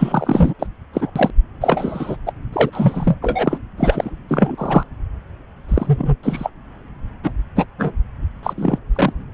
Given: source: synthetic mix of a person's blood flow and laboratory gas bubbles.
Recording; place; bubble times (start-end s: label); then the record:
Doppler ultrasound of blood flow; subclavian vein
0.00-0.53 s: bubbles
0.59-0.67 s: bubbles
0.93-1.10 s: bubbles
1.16-1.30 s: bubbles
1.61-2.17 s: bubbles
2.26-2.33 s: bubbles
2.52-3.16 s: bubbles
3.21-3.58 s: bubbles
3.77-4.10 s: bubbles
4.28-4.84 s: bubbles
5.68-6.16 s: bubbles
6.23-6.50 s: bubbles
7.23-7.32 s: bubbles
7.56-7.66 s: bubbles
7.78-7.92 s: bubbles
8.43-8.53 s: bubbles
8.56-8.78 s: bubbles
8.95-9.13 s: bubbles
From the record:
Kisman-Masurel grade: 243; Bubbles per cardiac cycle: several, 3 to 8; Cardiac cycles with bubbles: 100%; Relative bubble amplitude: loud (0.450 to 0.775); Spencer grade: 3 (all of the cardiac periods contain showers or single bubble signals, but not dominating or overriding the cardiac motion signals); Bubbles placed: anywhere in the cardiac cycle